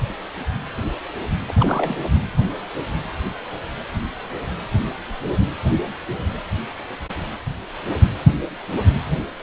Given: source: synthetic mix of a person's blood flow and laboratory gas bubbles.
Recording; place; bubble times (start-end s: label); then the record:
Doppler ultrasound of blood flow; precordium
1.47-1.52 s: bubbles
1.55-2.08 s: bubbles
From the record:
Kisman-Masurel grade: 212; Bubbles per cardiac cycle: several, 3 to 8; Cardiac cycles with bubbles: 1 to 10%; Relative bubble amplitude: moderate (0.250 to 0.450); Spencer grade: 1 (occasional bubble signal discernible with the cardiac motion signal, with majority of cardiac periods free of bubbles); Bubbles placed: anywhere in the cardiac cycle